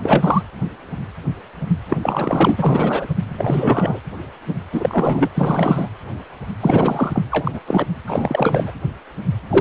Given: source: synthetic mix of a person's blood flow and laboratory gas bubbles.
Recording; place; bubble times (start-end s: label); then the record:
Doppler ultrasound of blood flow; precordium
0.00-0.42 s: bubbles
1.90-1.97 s: bubbles
2.02-3.06 s: bubbles
3.28-4.00 s: bubbles
4.72-5.29 s: bubbles
5.35-5.88 s: bubbles
6.60-7.23 s: bubbles
7.31-7.59 s: bubbles
7.67-7.87 s: bubbles
8.07-8.71 s: bubbles
9.49-9.61 s: bubbles
From the record:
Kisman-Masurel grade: 332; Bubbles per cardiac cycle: rolling drumbeat, 9 or more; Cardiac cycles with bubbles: 50 to 99%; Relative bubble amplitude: moderate (0.250 to 0.450); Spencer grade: 3 (all of the cardiac periods contain showers or single bubble signals, but not dominating or overriding the cardiac motion signals); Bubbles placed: anywhere in the cardiac cycle